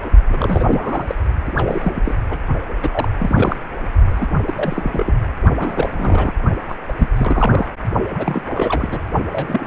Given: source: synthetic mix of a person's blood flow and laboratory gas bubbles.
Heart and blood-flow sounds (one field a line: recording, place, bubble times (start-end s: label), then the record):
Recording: Doppler ultrasound of blood flow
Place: precordium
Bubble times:
0.29-1.15 s: bubbles
1.46-1.52 s: bubbles
1.56-2.15 s: bubbles
2.30-2.38 s: bubbles
2.69-2.74 s: bubbles
2.82-3.08 s: bubbles
3.19-3.56 s: bubbles
4.13-4.27 s: bubbles
4.46-4.53 s: bubbles
4.55-5.18 s: bubbles
5.58-6.33 s: bubbles
6.68-6.75 s: bubbles
6.89-6.93 s: bubbles
6.98-7.08 s: bubbles
7.16-7.66 s: bubbles
8.14-8.41 s: bubbles
8.54-9.00 s: bubbles
9.29-9.67 s: bubbles
From the record:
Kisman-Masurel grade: 342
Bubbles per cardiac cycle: rolling drumbeat, 9 or more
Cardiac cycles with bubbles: 100%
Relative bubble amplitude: moderate (0.250 to 0.450)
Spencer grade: 3 (all of the cardiac periods contain showers or single bubble signals, but not dominating or overriding the cardiac motion signals)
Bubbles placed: only in the low amplitude regions of the cardiac cycle